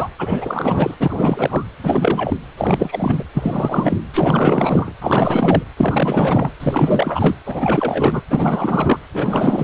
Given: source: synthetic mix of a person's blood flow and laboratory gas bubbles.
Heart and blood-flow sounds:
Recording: Doppler ultrasound of blood flow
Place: precordium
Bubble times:
0.00-0.10 s: bubbles
0.18-0.95 s: bubbles
0.99-1.67 s: bubbles
1.83-2.37 s: bubbles
2.57-3.24 s: bubbles
3.33-3.98 s: bubbles
4.13-4.92 s: bubbles
5.00-5.62 s: bubbles
5.76-6.52 s: bubbles
6.60-7.35 s: bubbles
7.46-8.23 s: bubbles
8.29-9.00 s: bubbles
9.13-9.64 s: bubbles
From the record:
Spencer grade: 4 (maximum detectable bubble signal sounding continuously throughout systole and diastole of every cardiac period, and overriding the amplitude of the normal cardiac signals)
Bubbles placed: anywhere in the cardiac cycle

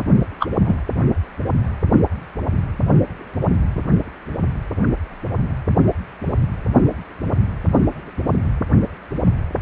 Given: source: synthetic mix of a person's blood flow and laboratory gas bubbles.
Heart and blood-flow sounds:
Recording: Doppler ultrasound of blood flow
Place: precordium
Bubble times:
0.40-0.47 s: bubbles
0.65-0.76 s: bubbles
From the record:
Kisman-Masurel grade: 113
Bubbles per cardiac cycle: 1 to 2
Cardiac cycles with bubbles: 1 to 10%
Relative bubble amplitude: loud (0.450 to 0.775)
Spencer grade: 1 (occasional bubble signal discernible with the cardiac motion signal, with majority of cardiac periods free of bubbles)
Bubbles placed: anywhere in the cardiac cycle

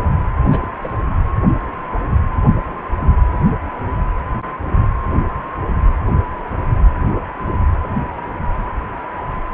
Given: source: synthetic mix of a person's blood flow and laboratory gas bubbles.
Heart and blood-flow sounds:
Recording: Doppler ultrasound of blood flow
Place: precordium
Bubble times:
0.44-0.59 s: bubbles
0.61-0.69 s: bubbles
0.75-0.96 s: bubbles
From the record:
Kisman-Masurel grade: 211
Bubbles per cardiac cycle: several, 3 to 8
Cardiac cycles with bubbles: 1 to 10%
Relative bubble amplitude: barely perceptible (0.100 to 0.250)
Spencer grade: 1 (occasional bubble signal discernible with the cardiac motion signal, with majority of cardiac periods free of bubbles)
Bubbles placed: anywhere in the cardiac cycle

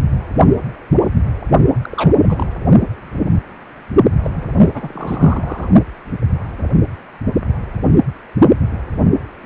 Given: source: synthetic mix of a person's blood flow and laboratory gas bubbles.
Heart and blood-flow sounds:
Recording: Doppler ultrasound of blood flow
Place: precordium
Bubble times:
1.82-2.48 s: bubbles
4.24-4.31 s: bubbles
4.35-4.42 s: bubbles
4.61-4.70 s: bubbles
4.74-5.68 s: bubbles
From the record:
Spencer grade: 2 (many but less than half of the cardiac periods contain bubble signals, singularly or in groups)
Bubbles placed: only in the low amplitude regions of the cardiac cycle

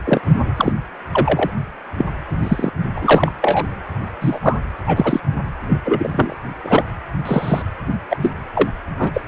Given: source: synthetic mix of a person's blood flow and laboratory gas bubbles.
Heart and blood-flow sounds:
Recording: Doppler ultrasound of blood flow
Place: precordium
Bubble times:
0.05-0.21 s: bubbles
0.56-0.72 s: bubbles
1.11-1.50 s: bubbles
1.97-2.06 s: bubbles
2.43-2.71 s: bubbles
2.96-3.32 s: bubbles
3.41-3.65 s: bubbles
4.21-4.39 s: bubbles
4.42-4.57 s: bubbles
4.87-5.20 s: bubbles
5.69-5.79 s: bubbles
5.84-6.35 s: bubbles
6.64-6.83 s: bubbles
7.25-7.62 s: bubbles
8.09-8.16 s: bubbles
8.21-8.31 s: bubbles
8.55-8.69 s: bubbles
8.97-9.21 s: bubbles
From the record:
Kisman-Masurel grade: 243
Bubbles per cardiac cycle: several, 3 to 8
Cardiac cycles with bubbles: 100%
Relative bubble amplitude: loud (0.450 to 0.775)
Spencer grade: 3 (all of the cardiac periods contain showers or single bubble signals, but not dominating or overriding the cardiac motion signals)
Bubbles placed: only in the low amplitude regions of the cardiac cycle

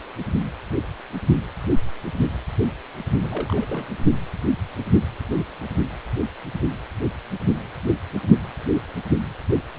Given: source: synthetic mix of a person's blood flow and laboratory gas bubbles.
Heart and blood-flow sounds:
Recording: Doppler ultrasound of blood flow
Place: precordium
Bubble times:
3.21-3.95 s: bubbles
From the record:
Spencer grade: 2 (many but less than half of the cardiac periods contain bubble signals, singularly or in groups)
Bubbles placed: only in the low amplitude regions of the cardiac cycle

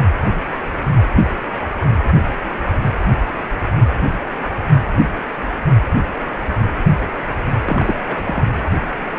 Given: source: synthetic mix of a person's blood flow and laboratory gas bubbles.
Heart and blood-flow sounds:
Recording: Doppler ultrasound of blood flow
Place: precordium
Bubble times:
7.65-7.95 s: bubbles
8.06-8.24 s: bubbles
8.27-8.43 s: bubbles
From the record:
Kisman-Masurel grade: 211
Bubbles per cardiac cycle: several, 3 to 8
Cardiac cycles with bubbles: 1 to 10%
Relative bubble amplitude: barely perceptible (0.100 to 0.250)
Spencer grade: 1 (occasional bubble signal discernible with the cardiac motion signal, with majority of cardiac periods free of bubbles)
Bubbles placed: anywhere in the cardiac cycle

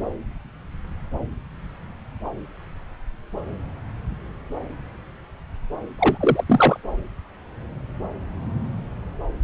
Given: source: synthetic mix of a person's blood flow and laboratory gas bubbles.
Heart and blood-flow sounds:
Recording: Doppler ultrasound of blood flow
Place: subclavian vein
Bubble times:
5.98-6.44 s: bubbles
6.48-6.77 s: bubbles
From the record:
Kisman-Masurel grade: 222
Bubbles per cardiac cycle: several, 3 to 8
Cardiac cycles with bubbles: 10 to 50%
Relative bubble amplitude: moderate (0.250 to 0.450)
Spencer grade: 2 (many but less than half of the cardiac periods contain bubble signals, singularly or in groups)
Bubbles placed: anywhere in the cardiac cycle

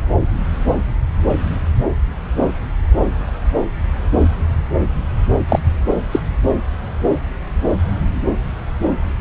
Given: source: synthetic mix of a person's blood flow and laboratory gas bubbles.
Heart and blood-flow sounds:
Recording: Doppler ultrasound of blood flow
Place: subclavian vein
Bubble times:
5.49-5.59 s: bubbles
6.11-6.20 s: bubbles
From the record:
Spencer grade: 1 (occasional bubble signal discernible with the cardiac motion signal, with majority of cardiac periods free of bubbles)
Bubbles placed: anywhere in the cardiac cycle

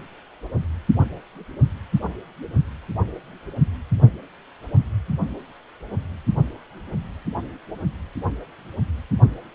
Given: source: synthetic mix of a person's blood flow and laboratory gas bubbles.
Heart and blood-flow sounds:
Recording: Doppler ultrasound of blood flow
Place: precordium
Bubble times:
no bubbles
From the record:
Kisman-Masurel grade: 000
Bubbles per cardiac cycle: 0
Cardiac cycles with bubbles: 0%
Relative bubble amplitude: no bubbles discernible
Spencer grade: 0 (complete lack of bubble signals)

